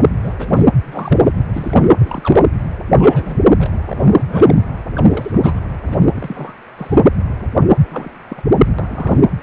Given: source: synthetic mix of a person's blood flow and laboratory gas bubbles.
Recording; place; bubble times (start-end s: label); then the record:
Doppler ultrasound of blood flow; precordium
0.00-0.10 s: bubbles
0.22-0.33 s: bubbles
0.38-0.63 s: bubbles
0.85-1.18 s: bubbles
1.34-1.43 s: bubbles
1.53-1.89 s: bubbles
2.00-2.49 s: bubbles
2.96-3.42 s: bubbles
3.58-3.69 s: bubbles
3.87-4.62 s: bubbles
4.96-5.05 s: bubbles
5.08-5.61 s: bubbles
5.88-6.54 s: bubbles
6.76-6.99 s: bubbles
7.89-8.11 s: bubbles
8.29-8.43 s: bubbles
8.79-9.19 s: bubbles
From the record:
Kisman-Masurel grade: 232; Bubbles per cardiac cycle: several, 3 to 8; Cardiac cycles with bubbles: 50 to 99%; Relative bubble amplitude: moderate (0.250 to 0.450); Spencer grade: 3 (all of the cardiac periods contain showers or single bubble signals, but not dominating or overriding the cardiac motion signals); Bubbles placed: anywhere in the cardiac cycle